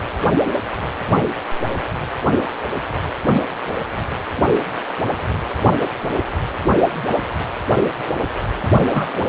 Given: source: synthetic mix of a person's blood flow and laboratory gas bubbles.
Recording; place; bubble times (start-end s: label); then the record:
Doppler ultrasound of blood flow; precordium
8.88-9.24 s: bubbles
From the record:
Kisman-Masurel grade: 222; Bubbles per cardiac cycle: several, 3 to 8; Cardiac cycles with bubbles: 10 to 50%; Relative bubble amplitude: moderate (0.250 to 0.450); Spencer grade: 2 (many but less than half of the cardiac periods contain bubble signals, singularly or in groups); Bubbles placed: only in the low amplitude regions of the cardiac cycle